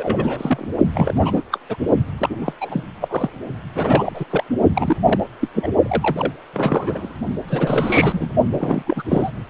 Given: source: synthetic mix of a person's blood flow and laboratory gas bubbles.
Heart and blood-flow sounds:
Doppler ultrasound of blood flow; precordium
0.00-0.67 s: bubbles
0.93-1.43 s: bubbles
1.52-1.58 s: bubbles
1.69-1.77 s: bubbles
2.18-2.53 s: bubbles
2.60-2.83 s: bubbles
3.01-3.30 s: bubbles
3.75-4.25 s: bubbles
4.30-4.43 s: bubbles
4.75-4.96 s: bubbles
5.05-5.20 s: bubbles
5.41-5.48 s: bubbles
5.54-5.68 s: bubbles
5.83-6.33 s: bubbles
6.53-7.14 s: bubbles
7.48-8.30 s: bubbles
8.51-8.82 s: bubbles
8.87-9.03 s: bubbles
9.10-9.30 s: bubbles
From the record:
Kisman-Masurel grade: 342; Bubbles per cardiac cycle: rolling drumbeat, 9 or more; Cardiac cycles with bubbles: 100%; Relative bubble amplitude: moderate (0.250 to 0.450); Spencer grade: 3 (all of the cardiac periods contain showers or single bubble signals, but not dominating or overriding the cardiac motion signals); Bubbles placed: only in the low amplitude regions of the cardiac cycle

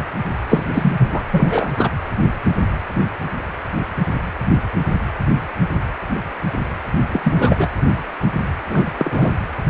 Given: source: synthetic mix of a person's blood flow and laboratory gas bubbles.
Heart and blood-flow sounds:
Doppler ultrasound of blood flow; precordium
0.49-0.64 s: bubbles
0.74-0.92 s: bubbles
0.98-1.22 s: bubbles
1.32-1.69 s: bubbles
1.76-1.89 s: bubbles
7.12-7.68 s: bubbles
8.69-8.91 s: bubbles
8.98-9.35 s: bubbles
From the record:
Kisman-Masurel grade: 223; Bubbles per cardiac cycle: several, 3 to 8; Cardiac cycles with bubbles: 10 to 50%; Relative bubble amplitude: loud (0.450 to 0.775); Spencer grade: 2 (many but less than half of the cardiac periods contain bubble signals, singularly or in groups); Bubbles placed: anywhere in the cardiac cycle

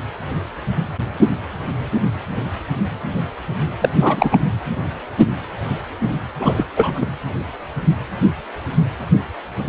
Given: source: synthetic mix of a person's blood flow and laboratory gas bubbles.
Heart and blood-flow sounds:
Doppler ultrasound of blood flow; precordium
3.80-3.89 s: bubbles
4.00-4.38 s: bubbles
6.40-6.63 s: bubbles
6.76-7.05 s: bubbles
From the record:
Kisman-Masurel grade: 223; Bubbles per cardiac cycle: several, 3 to 8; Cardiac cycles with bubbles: 10 to 50%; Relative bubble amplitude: loud (0.450 to 0.775); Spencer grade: 2 (many but less than half of the cardiac periods contain bubble signals, singularly or in groups); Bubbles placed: anywhere in the cardiac cycle

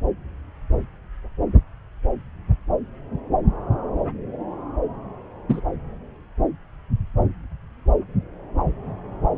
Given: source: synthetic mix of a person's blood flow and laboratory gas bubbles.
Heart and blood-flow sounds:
Doppler ultrasound of blood flow; subclavian vein
5.48-5.61 s: bubbles
From the record:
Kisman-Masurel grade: 113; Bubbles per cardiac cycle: 1 to 2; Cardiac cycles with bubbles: 1 to 10%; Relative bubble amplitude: loud (0.450 to 0.775); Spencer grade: 1 (occasional bubble signal discernible with the cardiac motion signal, with majority of cardiac periods free of bubbles); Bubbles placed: anywhere in the cardiac cycle

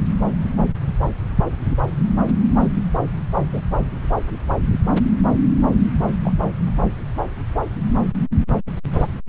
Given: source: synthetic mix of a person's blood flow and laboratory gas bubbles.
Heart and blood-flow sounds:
Doppler ultrasound of blood flow; subclavian vein
3.53-3.61 s: bubbles
6.23-6.33 s: bubbles
From the record:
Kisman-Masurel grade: 122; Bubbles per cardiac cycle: 1 to 2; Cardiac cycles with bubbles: 10 to 50%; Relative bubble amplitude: moderate (0.250 to 0.450); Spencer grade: 2 (many but less than half of the cardiac periods contain bubble signals, singularly or in groups); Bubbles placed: anywhere in the cardiac cycle

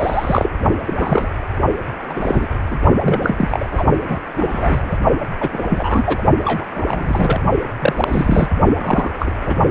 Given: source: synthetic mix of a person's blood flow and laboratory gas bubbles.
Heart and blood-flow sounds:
Doppler ultrasound of blood flow; precordium
0.00-0.50 s: bubbles
0.85-1.27 s: bubbles
2.09-2.46 s: bubbles
2.70-2.79 s: bubbles
3.02-3.34 s: bubbles
3.38-3.83 s: bubbles
4.08-4.20 s: bubbles
4.37-4.98 s: bubbles
5.40-5.49 s: bubbles
5.52-5.62 s: bubbles
5.70-6.22 s: bubbles
6.44-6.64 s: bubbles
6.75-7.40 s: bubbles
7.80-8.48 s: bubbles
8.77-9.11 s: bubbles
9.19-9.31 s: bubbles
9.46-9.55 s: bubbles
From the record:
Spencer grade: 3 (all of the cardiac periods contain showers or single bubble signals, but not dominating or overriding the cardiac motion signals); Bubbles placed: only in the low amplitude regions of the cardiac cycle

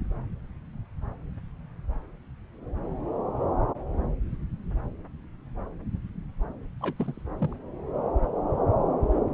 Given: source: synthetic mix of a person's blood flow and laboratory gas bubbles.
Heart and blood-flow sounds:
Doppler ultrasound of blood flow; subclavian vein
6.81-6.94 s: bubbles
6.99-7.13 s: bubbles
7.17-7.21 s: bubbles
7.39-7.53 s: bubbles
From the record:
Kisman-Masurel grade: 211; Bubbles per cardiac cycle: several, 3 to 8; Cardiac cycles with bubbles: 1 to 10%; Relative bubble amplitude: barely perceptible (0.100 to 0.250); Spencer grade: 1 (occasional bubble signal discernible with the cardiac motion signal, with majority of cardiac periods free of bubbles); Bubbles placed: anywhere in the cardiac cycle

